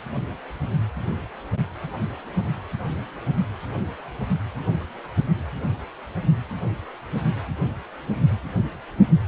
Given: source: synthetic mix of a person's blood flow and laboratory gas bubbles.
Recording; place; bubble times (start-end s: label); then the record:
Doppler ultrasound of blood flow; precordium
no bubbles
From the record:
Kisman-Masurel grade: 000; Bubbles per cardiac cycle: 0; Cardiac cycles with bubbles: 0%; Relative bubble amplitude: no bubbles discernible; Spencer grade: 0 (complete lack of bubble signals)